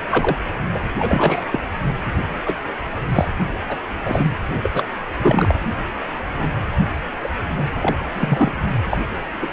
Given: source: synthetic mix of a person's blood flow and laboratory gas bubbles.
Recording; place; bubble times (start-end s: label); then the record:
Doppler ultrasound of blood flow; precordium
0.10-0.38 s: bubbles
0.74-0.84 s: bubbles
0.98-1.46 s: bubbles
1.51-1.60 s: bubbles
2.46-2.55 s: bubbles
3.08-3.31 s: bubbles
3.68-3.77 s: bubbles
4.04-4.36 s: bubbles
4.61-4.84 s: bubbles
5.19-5.54 s: bubbles
6.38-6.48 s: bubbles
7.23-7.29 s: bubbles
7.56-7.65 s: bubbles
7.81-7.97 s: bubbles
8.13-8.53 s: bubbles
8.89-8.97 s: bubbles
9.41-9.48 s: bubbles
From the record:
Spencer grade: 3 (all of the cardiac periods contain showers or single bubble signals, but not dominating or overriding the cardiac motion signals); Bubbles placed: anywhere in the cardiac cycle